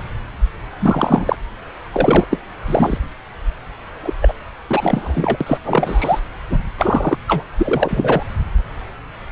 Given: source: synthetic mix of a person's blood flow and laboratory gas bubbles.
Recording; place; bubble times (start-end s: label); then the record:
Doppler ultrasound of blood flow; subclavian vein
0.79-1.36 s: bubbles
1.92-2.26 s: bubbles
2.30-2.38 s: bubbles
2.67-2.98 s: bubbles
4.02-4.13 s: bubbles
4.21-4.34 s: bubbles
4.67-5.38 s: bubbles
5.41-5.58 s: bubbles
5.64-6.20 s: bubbles
6.49-6.62 s: bubbles
6.78-7.18 s: bubbles
7.27-7.43 s: bubbles
7.58-8.23 s: bubbles
From the record:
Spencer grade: 3 (all of the cardiac periods contain showers or single bubble signals, but not dominating or overriding the cardiac motion signals); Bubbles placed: anywhere in the cardiac cycle